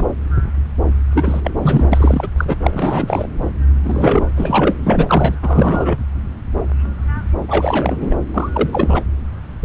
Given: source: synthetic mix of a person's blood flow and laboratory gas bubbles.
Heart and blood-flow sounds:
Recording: Doppler ultrasound of blood flow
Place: subclavian vein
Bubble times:
0.00-0.07 s: bubbles
1.14-1.41 s: bubbles
1.43-1.51 s: bubbles
1.62-1.88 s: bubbles
1.92-2.28 s: bubbles
2.37-2.45 s: bubbles
2.48-2.57 s: bubbles
2.62-3.28 s: bubbles
3.83-4.27 s: bubbles
4.36-4.75 s: bubbles
4.83-5.36 s: bubbles
5.42-5.97 s: bubbles
7.49-8.15 s: bubbles
8.34-8.49 s: bubbles
8.52-9.04 s: bubbles
From the record:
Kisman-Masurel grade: 333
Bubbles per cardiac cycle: rolling drumbeat, 9 or more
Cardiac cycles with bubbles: 50 to 99%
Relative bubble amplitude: loud (0.450 to 0.775)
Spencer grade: 3 (all of the cardiac periods contain showers or single bubble signals, but not dominating or overriding the cardiac motion signals)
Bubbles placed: anywhere in the cardiac cycle

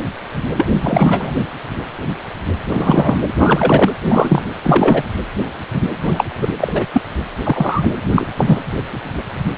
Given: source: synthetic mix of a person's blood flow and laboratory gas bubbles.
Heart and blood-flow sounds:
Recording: Doppler ultrasound of blood flow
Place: precordium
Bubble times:
0.57-0.68 s: bubbles
0.81-1.32 s: bubbles
2.69-3.17 s: bubbles
3.39-3.92 s: bubbles
3.99-4.42 s: bubbles
4.63-5.03 s: bubbles
6.02-6.24 s: bubbles
6.41-6.48 s: bubbles
6.60-6.86 s: bubbles
6.93-7.02 s: bubbles
7.43-7.93 s: bubbles
8.11-8.26 s: bubbles
8.37-8.58 s: bubbles
From the record:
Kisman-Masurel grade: 223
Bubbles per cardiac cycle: several, 3 to 8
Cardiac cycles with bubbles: 10 to 50%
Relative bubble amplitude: loud (0.450 to 0.775)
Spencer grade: 2 (many but less than half of the cardiac periods contain bubble signals, singularly or in groups)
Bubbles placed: anywhere in the cardiac cycle

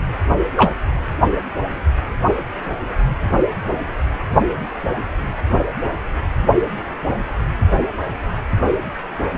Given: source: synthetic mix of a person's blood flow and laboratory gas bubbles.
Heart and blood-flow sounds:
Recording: Doppler ultrasound of blood flow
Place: precordium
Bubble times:
0.56-0.72 s: bubbles
From the record:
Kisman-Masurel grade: 113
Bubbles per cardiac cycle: 1 to 2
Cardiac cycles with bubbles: 1 to 10%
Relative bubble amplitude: loud (0.450 to 0.775)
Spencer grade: 1 (occasional bubble signal discernible with the cardiac motion signal, with majority of cardiac periods free of bubbles)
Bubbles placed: only in the low amplitude regions of the cardiac cycle

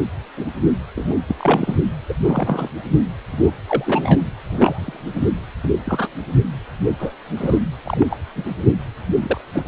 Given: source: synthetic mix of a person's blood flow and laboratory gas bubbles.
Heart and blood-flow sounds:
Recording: Doppler ultrasound of blood flow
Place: precordium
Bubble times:
0.37-0.47 s: bubbles
0.96-1.15 s: bubbles
1.28-1.36 s: bubbles
1.39-1.76 s: bubbles
2.08-2.14 s: bubbles
2.25-2.69 s: bubbles
3.31-3.52 s: bubbles
3.67-4.21 s: bubbles
4.49-5.00 s: bubbles
5.15-5.26 s: bubbles
5.63-5.69 s: bubbles
5.85-6.08 s: bubbles
6.99-7.14 s: bubbles
7.37-7.58 s: bubbles
7.85-8.05 s: bubbles
8.10-8.17 s: bubbles
8.36-8.51 s: bubbles
9.21-9.41 s: bubbles
9.53-9.68 s: bubbles
From the record:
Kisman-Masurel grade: 242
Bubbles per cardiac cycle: several, 3 to 8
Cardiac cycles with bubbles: 100%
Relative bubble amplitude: moderate (0.250 to 0.450)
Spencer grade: 3 (all of the cardiac periods contain showers or single bubble signals, but not dominating or overriding the cardiac motion signals)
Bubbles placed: anywhere in the cardiac cycle

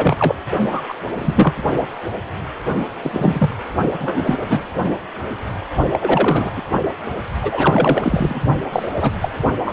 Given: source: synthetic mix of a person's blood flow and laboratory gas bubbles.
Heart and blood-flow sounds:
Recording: Doppler ultrasound of blood flow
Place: precordium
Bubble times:
0.00-0.35 s: bubbles
0.71-0.81 s: bubbles
0.89-0.94 s: bubbles
1.18-1.54 s: bubbles
3.02-3.56 s: bubbles
4.00-4.67 s: bubbles
5.91-6.51 s: bubbles
6.56-6.62 s: bubbles
7.41-8.42 s: bubbles
8.72-8.90 s: bubbles
9.00-9.13 s: bubbles
9.21-9.29 s: bubbles
9.65-9.73 s: bubbles
From the record:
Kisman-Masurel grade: 233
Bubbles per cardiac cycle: several, 3 to 8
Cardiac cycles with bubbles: 50 to 99%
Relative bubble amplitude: loud (0.450 to 0.775)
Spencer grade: 3 (all of the cardiac periods contain showers or single bubble signals, but not dominating or overriding the cardiac motion signals)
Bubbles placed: only in the low amplitude regions of the cardiac cycle

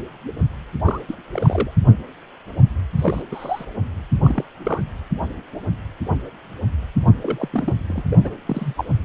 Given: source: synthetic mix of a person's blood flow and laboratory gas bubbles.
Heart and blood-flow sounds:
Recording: Doppler ultrasound of blood flow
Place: precordium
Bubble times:
0.85-1.01 s: bubbles
1.08-1.16 s: bubbles
1.31-1.71 s: bubbles
2.98-3.22 s: bubbles
3.31-3.65 s: bubbles
4.23-4.44 s: bubbles
4.64-4.84 s: bubbles
7.21-7.49 s: bubbles
7.52-7.74 s: bubbles
7.88-8.03 s: bubbles
8.10-8.16 s: bubbles
8.23-8.34 s: bubbles
8.47-8.74 s: bubbles
8.77-8.85 s: bubbles
From the record:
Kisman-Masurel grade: 232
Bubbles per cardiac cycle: several, 3 to 8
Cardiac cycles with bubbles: 50 to 99%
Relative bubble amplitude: moderate (0.250 to 0.450)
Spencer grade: 3 (all of the cardiac periods contain showers or single bubble signals, but not dominating or overriding the cardiac motion signals)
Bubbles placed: anywhere in the cardiac cycle

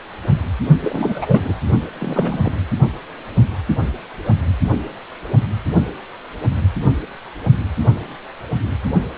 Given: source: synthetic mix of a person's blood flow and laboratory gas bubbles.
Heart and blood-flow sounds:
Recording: Doppler ultrasound of blood flow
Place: precordium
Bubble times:
0.83-1.41 s: bubbles
1.44-1.54 s: bubbles
1.99-2.52 s: bubbles
From the record:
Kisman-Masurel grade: 222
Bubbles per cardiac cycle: several, 3 to 8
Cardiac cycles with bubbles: 10 to 50%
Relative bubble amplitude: moderate (0.250 to 0.450)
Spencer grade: 2 (many but less than half of the cardiac periods contain bubble signals, singularly or in groups)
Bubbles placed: only in the low amplitude regions of the cardiac cycle

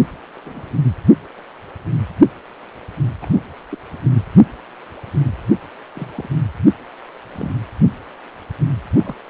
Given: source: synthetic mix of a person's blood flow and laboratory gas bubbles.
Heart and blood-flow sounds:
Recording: Doppler ultrasound of blood flow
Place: precordium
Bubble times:
0.45-0.76 s: bubbles
3.21-3.41 s: bubbles
3.69-3.78 s: bubbles
5.94-6.10 s: bubbles
6.15-6.29 s: bubbles
7.33-7.52 s: bubbles
8.93-9.14 s: bubbles
From the record:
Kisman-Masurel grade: 121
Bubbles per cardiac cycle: 1 to 2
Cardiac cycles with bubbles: 10 to 50%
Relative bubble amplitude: barely perceptible (0.100 to 0.250)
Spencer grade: 2 (many but less than half of the cardiac periods contain bubble signals, singularly or in groups)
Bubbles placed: anywhere in the cardiac cycle

